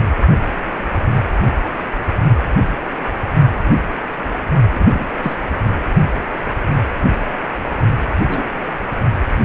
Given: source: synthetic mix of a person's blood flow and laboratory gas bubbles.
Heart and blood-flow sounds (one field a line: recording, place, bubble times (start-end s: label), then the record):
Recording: Doppler ultrasound of blood flow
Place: precordium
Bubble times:
4.70-5.11 s: bubbles
5.23-5.37 s: bubbles
8.28-8.44 s: bubbles
From the record:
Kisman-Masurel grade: 122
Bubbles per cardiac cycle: 1 to 2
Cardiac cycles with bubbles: 10 to 50%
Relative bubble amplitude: moderate (0.250 to 0.450)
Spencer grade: 2 (many but less than half of the cardiac periods contain bubble signals, singularly or in groups)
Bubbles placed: only in the low amplitude regions of the cardiac cycle